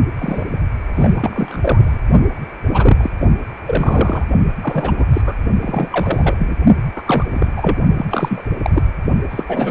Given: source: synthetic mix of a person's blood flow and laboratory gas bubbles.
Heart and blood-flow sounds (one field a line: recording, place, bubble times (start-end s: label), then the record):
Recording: Doppler ultrasound of blood flow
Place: precordium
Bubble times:
0.18-0.46 s: bubbles
0.95-1.97 s: bubbles
2.68-3.10 s: bubbles
3.20-3.27 s: bubbles
3.67-4.24 s: bubbles
4.61-5.05 s: bubbles
5.13-5.21 s: bubbles
5.25-5.36 s: bubbles
5.61-6.35 s: bubbles
6.38-6.55 s: bubbles
6.96-7.02 s: bubbles
7.06-7.26 s: bubbles
7.33-7.52 s: bubbles
7.56-7.77 s: bubbles
7.98-8.05 s: bubbles
8.10-8.44 s: bubbles
8.63-8.70 s: bubbles
8.73-8.82 s: bubbles
9.30-9.44 s: bubbles
9.48-9.71 s: bubbles
From the record:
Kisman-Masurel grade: 343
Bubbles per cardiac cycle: rolling drumbeat, 9 or more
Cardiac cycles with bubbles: 100%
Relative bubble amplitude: loud (0.450 to 0.775)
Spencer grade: 3 (all of the cardiac periods contain showers or single bubble signals, but not dominating or overriding the cardiac motion signals)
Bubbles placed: only in the low amplitude regions of the cardiac cycle